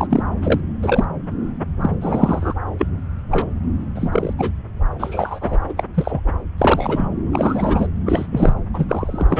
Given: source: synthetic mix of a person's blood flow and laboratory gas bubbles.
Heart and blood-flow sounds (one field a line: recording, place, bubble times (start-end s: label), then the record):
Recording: Doppler ultrasound of blood flow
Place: subclavian vein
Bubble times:
0.00-0.07 s: bubbles
0.10-0.23 s: bubbles
0.41-0.60 s: bubbles
0.82-1.04 s: bubbles
1.81-1.91 s: bubbles
2.01-2.54 s: bubbles
2.79-2.88 s: bubbles
3.31-3.47 s: bubbles
3.94-4.33 s: bubbles
4.38-4.51 s: bubbles
4.98-5.58 s: bubbles
5.68-5.73 s: bubbles
5.77-5.83 s: bubbles
5.94-6.21 s: bubbles
6.58-7.07 s: bubbles
7.33-7.87 s: bubbles
8.06-8.27 s: bubbles
8.32-8.54 s: bubbles
8.74-8.86 s: bubbles
8.89-9.40 s: bubbles
From the record:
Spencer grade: 3 (all of the cardiac periods contain showers or single bubble signals, but not dominating or overriding the cardiac motion signals)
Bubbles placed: anywhere in the cardiac cycle